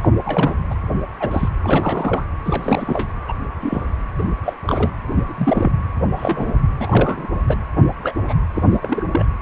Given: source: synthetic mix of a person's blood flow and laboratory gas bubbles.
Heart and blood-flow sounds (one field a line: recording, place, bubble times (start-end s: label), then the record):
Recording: Doppler ultrasound of blood flow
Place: precordium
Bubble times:
0.02-0.09 s: bubbles
0.15-0.55 s: bubbles
0.70-0.74 s: bubbles
1.20-1.48 s: bubbles
1.62-2.24 s: bubbles
2.45-3.08 s: bubbles
3.28-3.34 s: bubbles
3.60-3.83 s: bubbles
4.18-4.23 s: bubbles
4.45-4.54 s: bubbles
4.67-4.91 s: bubbles
5.15-5.70 s: bubbles
6.15-6.57 s: bubbles
6.79-7.27 s: bubbles
7.48-7.58 s: bubbles
8.03-8.13 s: bubbles
8.24-8.41 s: bubbles
8.54-8.63 s: bubbles
8.71-9.08 s: bubbles
9.11-9.25 s: bubbles
From the record:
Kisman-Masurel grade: 242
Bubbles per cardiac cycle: several, 3 to 8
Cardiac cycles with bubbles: 100%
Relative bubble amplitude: moderate (0.250 to 0.450)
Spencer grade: 3 (all of the cardiac periods contain showers or single bubble signals, but not dominating or overriding the cardiac motion signals)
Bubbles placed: anywhere in the cardiac cycle